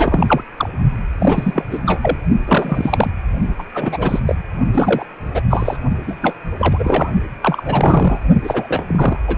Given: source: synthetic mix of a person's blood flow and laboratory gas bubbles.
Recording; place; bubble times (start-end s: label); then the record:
Doppler ultrasound of blood flow; precordium
0.00-0.43 s: bubbles
0.56-0.69 s: bubbles
1.19-1.65 s: bubbles
1.71-1.79 s: bubbles
1.85-2.17 s: bubbles
2.46-3.10 s: bubbles
3.58-3.63 s: bubbles
3.74-4.20 s: bubbles
4.26-4.35 s: bubbles
4.73-5.06 s: bubbles
5.33-5.41 s: bubbles
5.50-5.77 s: bubbles
6.07-6.16 s: bubbles
6.22-6.36 s: bubbles
6.58-7.10 s: bubbles
7.42-8.20 s: bubbles
8.43-9.18 s: bubbles
9.27-9.37 s: bubbles
From the record:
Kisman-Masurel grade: 343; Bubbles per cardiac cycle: rolling drumbeat, 9 or more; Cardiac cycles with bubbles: 100%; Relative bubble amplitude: loud (0.450 to 0.775); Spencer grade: 3 (all of the cardiac periods contain showers or single bubble signals, but not dominating or overriding the cardiac motion signals); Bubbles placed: only in the low amplitude regions of the cardiac cycle